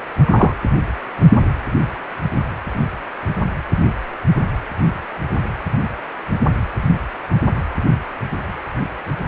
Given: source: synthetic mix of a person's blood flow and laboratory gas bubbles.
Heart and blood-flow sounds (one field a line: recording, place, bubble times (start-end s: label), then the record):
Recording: Doppler ultrasound of blood flow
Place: precordium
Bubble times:
0.24-0.53 s: bubbles
From the record:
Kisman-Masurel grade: 213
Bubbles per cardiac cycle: several, 3 to 8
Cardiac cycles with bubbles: 1 to 10%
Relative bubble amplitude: loud (0.450 to 0.775)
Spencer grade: 1 (occasional bubble signal discernible with the cardiac motion signal, with majority of cardiac periods free of bubbles)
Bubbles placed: anywhere in the cardiac cycle